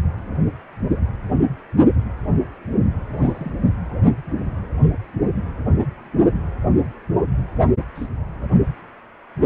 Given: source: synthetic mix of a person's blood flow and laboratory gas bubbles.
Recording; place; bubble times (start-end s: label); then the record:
Doppler ultrasound of blood flow; precordium
3.13-3.51 s: bubbles
7.95-8.07 s: bubbles
From the record:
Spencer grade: 2 (many but less than half of the cardiac periods contain bubble signals, singularly or in groups); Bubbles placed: anywhere in the cardiac cycle